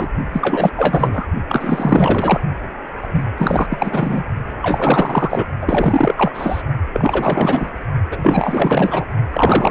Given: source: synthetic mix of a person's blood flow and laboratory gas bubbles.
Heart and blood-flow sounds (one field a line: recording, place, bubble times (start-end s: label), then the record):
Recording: Doppler ultrasound of blood flow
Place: precordium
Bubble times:
0.00-0.08 s: bubbles
0.33-0.70 s: bubbles
0.76-1.26 s: bubbles
1.49-2.40 s: bubbles
3.01-3.23 s: bubbles
3.38-3.67 s: bubbles
3.70-4.24 s: bubbles
4.62-5.46 s: bubbles
5.61-6.15 s: bubbles
6.17-6.62 s: bubbles
6.93-7.70 s: bubbles
8.11-9.05 s: bubbles
9.30-9.70 s: bubbles
From the record:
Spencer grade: 4 (maximum detectable bubble signal sounding continuously throughout systole and diastole of every cardiac period, and overriding the amplitude of the normal cardiac signals)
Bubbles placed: only in the low amplitude regions of the cardiac cycle